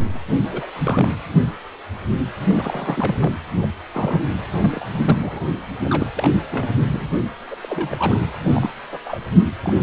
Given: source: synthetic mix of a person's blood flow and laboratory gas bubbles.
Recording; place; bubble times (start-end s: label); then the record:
Doppler ultrasound of blood flow; precordium
0.00-0.18 s: bubbles
0.51-0.67 s: bubbles
0.83-1.09 s: bubbles
2.47-3.17 s: bubbles
3.20-3.33 s: bubbles
3.62-3.69 s: bubbles
3.93-4.25 s: bubbles
4.59-4.87 s: bubbles
4.92-5.41 s: bubbles
5.84-6.11 s: bubbles
6.17-6.29 s: bubbles
6.50-6.69 s: bubbles
6.88-7.08 s: bubbles
7.50-7.55 s: bubbles
7.62-8.18 s: bubbles
8.42-8.71 s: bubbles
8.88-8.98 s: bubbles
9.05-9.21 s: bubbles
9.62-9.82 s: bubbles
From the record:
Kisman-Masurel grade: 232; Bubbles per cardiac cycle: several, 3 to 8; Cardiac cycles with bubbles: 50 to 99%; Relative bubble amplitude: moderate (0.250 to 0.450); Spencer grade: 3 (all of the cardiac periods contain showers or single bubble signals, but not dominating or overriding the cardiac motion signals); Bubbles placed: anywhere in the cardiac cycle